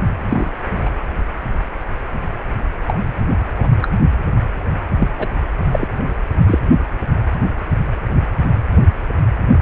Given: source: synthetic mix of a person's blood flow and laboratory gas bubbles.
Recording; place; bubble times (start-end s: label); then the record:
Doppler ultrasound of blood flow; precordium
0.29-0.51 s: bubbles
0.85-0.90 s: bubbles
2.88-3.00 s: bubbles
3.57-3.69 s: bubbles
3.82-3.87 s: bubbles
4.91-5.08 s: bubbles
5.19-5.29 s: bubbles
5.73-5.88 s: bubbles
6.46-6.60 s: bubbles
From the record:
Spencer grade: 2 (many but less than half of the cardiac periods contain bubble signals, singularly or in groups); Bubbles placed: anywhere in the cardiac cycle